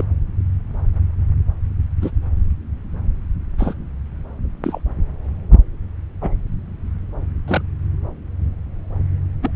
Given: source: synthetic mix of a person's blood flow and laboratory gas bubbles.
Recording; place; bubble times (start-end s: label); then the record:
Doppler ultrasound of blood flow; subclavian vein
0.00-0.04 s: bubbles
2.01-2.11 s: bubbles
3.58-3.74 s: bubbles
4.64-4.81 s: bubbles
6.21-6.31 s: bubbles
7.48-7.62 s: bubbles
9.42-9.51 s: bubbles
From the record:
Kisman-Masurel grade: 122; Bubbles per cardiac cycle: 1 to 2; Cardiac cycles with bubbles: 10 to 50%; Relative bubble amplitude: moderate (0.250 to 0.450); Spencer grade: 2 (many but less than half of the cardiac periods contain bubble signals, singularly or in groups); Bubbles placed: anywhere in the cardiac cycle